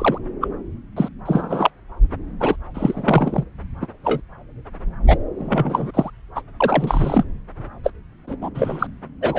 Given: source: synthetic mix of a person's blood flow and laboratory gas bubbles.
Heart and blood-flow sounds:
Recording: Doppler ultrasound of blood flow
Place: subclavian vein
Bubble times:
0.00-0.18 s: bubbles
0.41-0.48 s: bubbles
0.96-1.08 s: bubbles
1.25-1.70 s: bubbles
2.40-2.56 s: bubbles
2.74-3.44 s: bubbles
3.82-3.88 s: bubbles
4.04-4.21 s: bubbles
5.07-5.18 s: bubbles
5.38-5.91 s: bubbles
5.94-6.10 s: bubbles
6.35-6.42 s: bubbles
6.60-7.24 s: bubbles
7.83-7.92 s: bubbles
8.27-8.36 s: bubbles
8.41-8.50 s: bubbles
8.54-8.87 s: bubbles
9.21-9.39 s: bubbles
From the record:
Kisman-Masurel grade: 243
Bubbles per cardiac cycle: several, 3 to 8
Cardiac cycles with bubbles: 100%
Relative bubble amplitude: loud (0.450 to 0.775)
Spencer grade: 3 (all of the cardiac periods contain showers or single bubble signals, but not dominating or overriding the cardiac motion signals)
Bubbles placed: anywhere in the cardiac cycle

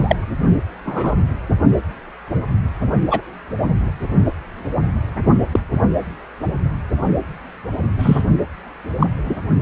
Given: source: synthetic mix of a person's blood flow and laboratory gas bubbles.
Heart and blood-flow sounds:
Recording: Doppler ultrasound of blood flow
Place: precordium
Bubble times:
0.00-0.16 s: bubbles
0.85-1.14 s: bubbles
3.10-3.21 s: bubbles
5.53-5.59 s: bubbles
7.98-8.22 s: bubbles
8.99-9.06 s: bubbles
9.26-9.36 s: bubbles
From the record:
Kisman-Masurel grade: 123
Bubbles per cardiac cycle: 1 to 2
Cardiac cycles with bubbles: 10 to 50%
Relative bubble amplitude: loud (0.450 to 0.775)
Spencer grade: 2 (many but less than half of the cardiac periods contain bubble signals, singularly or in groups)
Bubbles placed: only in the low amplitude regions of the cardiac cycle

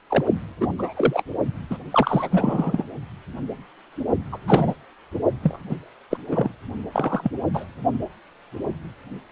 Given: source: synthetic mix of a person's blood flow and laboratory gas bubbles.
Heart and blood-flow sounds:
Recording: Doppler ultrasound of blood flow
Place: precordium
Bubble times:
0.10-0.25 s: bubbles
0.60-0.74 s: bubbles
0.78-1.23 s: bubbles
1.70-1.78 s: bubbles
1.91-2.84 s: bubbles
4.32-4.38 s: bubbles
4.47-4.74 s: bubbles
5.43-5.59 s: bubbles
5.69-5.77 s: bubbles
6.10-6.17 s: bubbles
6.28-6.52 s: bubbles
6.92-7.32 s: bubbles
7.54-7.66 s: bubbles
From the record:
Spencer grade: 3 (all of the cardiac periods contain showers or single bubble signals, but not dominating or overriding the cardiac motion signals)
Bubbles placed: only in the low amplitude regions of the cardiac cycle

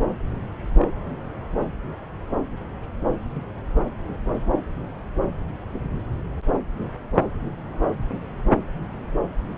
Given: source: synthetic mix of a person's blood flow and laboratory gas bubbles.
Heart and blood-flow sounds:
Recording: Doppler ultrasound of blood flow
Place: subclavian vein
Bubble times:
0.73-0.87 s: bubbles
From the record:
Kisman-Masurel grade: 111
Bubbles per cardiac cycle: 1 to 2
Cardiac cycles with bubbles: 1 to 10%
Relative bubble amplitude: barely perceptible (0.100 to 0.250)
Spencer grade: 1 (occasional bubble signal discernible with the cardiac motion signal, with majority of cardiac periods free of bubbles)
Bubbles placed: anywhere in the cardiac cycle

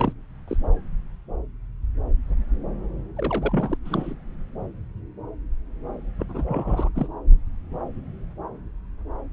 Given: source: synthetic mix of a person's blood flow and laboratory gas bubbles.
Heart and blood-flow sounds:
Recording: Doppler ultrasound of blood flow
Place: subclavian vein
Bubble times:
0.00-0.12 s: bubbles
0.48-0.57 s: bubbles
3.17-3.77 s: bubbles
3.84-4.13 s: bubbles
6.20-6.26 s: bubbles
6.29-6.46 s: bubbles
6.48-6.90 s: bubbles
6.95-7.08 s: bubbles
From the record:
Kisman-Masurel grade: 221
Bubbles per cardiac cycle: several, 3 to 8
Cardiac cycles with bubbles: 10 to 50%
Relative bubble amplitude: barely perceptible (0.100 to 0.250)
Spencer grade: 2 (many but less than half of the cardiac periods contain bubble signals, singularly or in groups)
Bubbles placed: anywhere in the cardiac cycle

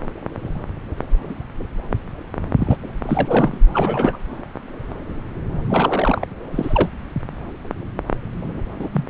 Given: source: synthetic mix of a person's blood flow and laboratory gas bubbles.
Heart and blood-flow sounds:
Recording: Doppler ultrasound of blood flow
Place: subclavian vein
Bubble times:
2.58-2.77 s: bubbles
3.03-3.58 s: bubbles
3.73-4.17 s: bubbles
5.70-6.26 s: bubbles
6.51-6.88 s: bubbles
8.79-8.89 s: bubbles
8.93-9.06 s: bubbles
From the record:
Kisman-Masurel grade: 222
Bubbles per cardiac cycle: several, 3 to 8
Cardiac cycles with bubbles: 10 to 50%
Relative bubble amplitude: moderate (0.250 to 0.450)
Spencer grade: 2 (many but less than half of the cardiac periods contain bubble signals, singularly or in groups)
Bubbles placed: anywhere in the cardiac cycle

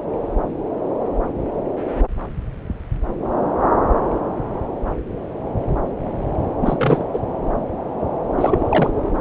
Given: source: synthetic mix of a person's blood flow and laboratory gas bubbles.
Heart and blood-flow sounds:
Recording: Doppler ultrasound of blood flow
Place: subclavian vein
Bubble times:
6.61-7.04 s: bubbles
7.13-7.19 s: bubbles
8.37-8.92 s: bubbles
From the record:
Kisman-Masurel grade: 223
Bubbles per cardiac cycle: several, 3 to 8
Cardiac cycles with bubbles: 10 to 50%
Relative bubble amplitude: loud (0.450 to 0.775)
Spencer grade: 2 (many but less than half of the cardiac periods contain bubble signals, singularly or in groups)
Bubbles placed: anywhere in the cardiac cycle

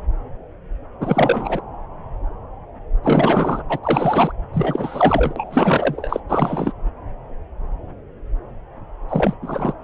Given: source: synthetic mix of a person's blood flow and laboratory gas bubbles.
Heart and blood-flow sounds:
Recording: Doppler ultrasound of blood flow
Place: subclavian vein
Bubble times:
1.00-1.61 s: bubbles
3.03-3.62 s: bubbles
3.69-3.80 s: bubbles
3.83-4.32 s: bubbles
4.53-6.20 s: bubbles
6.29-6.73 s: bubbles
9.08-9.34 s: bubbles
9.42-9.73 s: bubbles
From the record:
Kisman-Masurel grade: 333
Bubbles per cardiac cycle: rolling drumbeat, 9 or more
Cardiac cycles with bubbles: 50 to 99%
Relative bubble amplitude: loud (0.450 to 0.775)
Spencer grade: 3 (all of the cardiac periods contain showers or single bubble signals, but not dominating or overriding the cardiac motion signals)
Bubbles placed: anywhere in the cardiac cycle

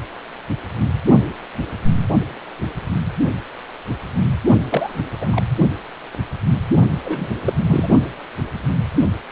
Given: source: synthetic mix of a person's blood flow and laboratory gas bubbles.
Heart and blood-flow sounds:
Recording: Doppler ultrasound of blood flow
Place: precordium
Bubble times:
4.69-5.02 s: bubbles
5.20-5.42 s: bubbles
7.02-7.31 s: bubbles
7.44-7.53 s: bubbles
7.67-7.90 s: bubbles
From the record:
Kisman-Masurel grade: 222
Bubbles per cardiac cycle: several, 3 to 8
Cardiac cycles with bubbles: 10 to 50%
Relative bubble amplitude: moderate (0.250 to 0.450)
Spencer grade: 2 (many but less than half of the cardiac periods contain bubble signals, singularly or in groups)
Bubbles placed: only in the low amplitude regions of the cardiac cycle

